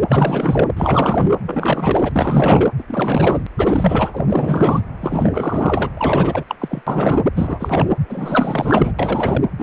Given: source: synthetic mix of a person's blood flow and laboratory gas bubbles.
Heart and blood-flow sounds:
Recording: Doppler ultrasound of blood flow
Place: precordium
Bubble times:
0.08-0.68 s: bubbles
0.77-1.36 s: bubbles
1.46-2.69 s: bubbles
2.79-2.83 s: bubbles
2.88-3.43 s: bubbles
3.58-4.26 s: bubbles
4.29-4.80 s: bubbles
5.00-5.89 s: bubbles
5.97-6.44 s: bubbles
6.48-6.55 s: bubbles
6.59-6.81 s: bubbles
6.86-7.21 s: bubbles
7.35-7.91 s: bubbles
8.10-8.93 s: bubbles
8.99-9.44 s: bubbles
9.59-9.63 s: bubbles
From the record:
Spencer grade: 4 (maximum detectable bubble signal sounding continuously throughout systole and diastole of every cardiac period, and overriding the amplitude of the normal cardiac signals)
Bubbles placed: anywhere in the cardiac cycle

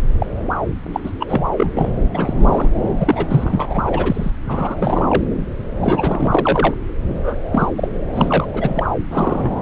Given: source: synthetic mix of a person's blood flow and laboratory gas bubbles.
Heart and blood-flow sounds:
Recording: Doppler ultrasound of blood flow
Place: subclavian vein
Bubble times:
0.19-0.27 s: bubbles
0.93-1.00 s: bubbles
1.03-1.12 s: bubbles
1.20-1.51 s: bubbles
1.56-1.70 s: bubbles
1.77-1.91 s: bubbles
2.10-2.33 s: bubbles
2.40-2.69 s: bubbles
2.97-3.26 s: bubbles
3.29-4.31 s: bubbles
4.48-5.07 s: bubbles
5.09-5.22 s: bubbles
5.81-6.74 s: bubbles
7.15-7.36 s: bubbles
7.52-7.69 s: bubbles
7.75-7.88 s: bubbles
8.15-8.46 s: bubbles
8.53-8.89 s: bubbles
9.10-9.51 s: bubbles
From the record:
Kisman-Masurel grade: 343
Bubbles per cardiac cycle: rolling drumbeat, 9 or more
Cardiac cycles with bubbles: 100%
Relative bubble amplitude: loud (0.450 to 0.775)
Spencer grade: 3 (all of the cardiac periods contain showers or single bubble signals, but not dominating or overriding the cardiac motion signals)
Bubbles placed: anywhere in the cardiac cycle

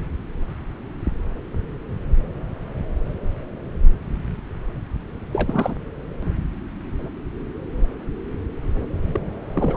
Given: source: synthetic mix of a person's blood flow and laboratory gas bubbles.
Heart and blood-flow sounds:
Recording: Doppler ultrasound of blood flow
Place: subclavian vein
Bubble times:
5.33-5.75 s: bubbles
9.12-9.20 s: bubbles
9.54-9.77 s: bubbles
From the record:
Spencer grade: 1 (occasional bubble signal discernible with the cardiac motion signal, with majority of cardiac periods free of bubbles)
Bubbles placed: anywhere in the cardiac cycle

